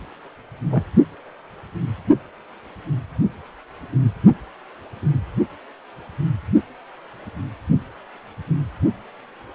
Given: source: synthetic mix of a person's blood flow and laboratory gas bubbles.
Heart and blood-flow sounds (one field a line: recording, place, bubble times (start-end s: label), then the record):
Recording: Doppler ultrasound of blood flow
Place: precordium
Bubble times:
0.70-0.85 s: bubbles
From the record:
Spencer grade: 2 (many but less than half of the cardiac periods contain bubble signals, singularly or in groups)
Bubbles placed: only in the low amplitude regions of the cardiac cycle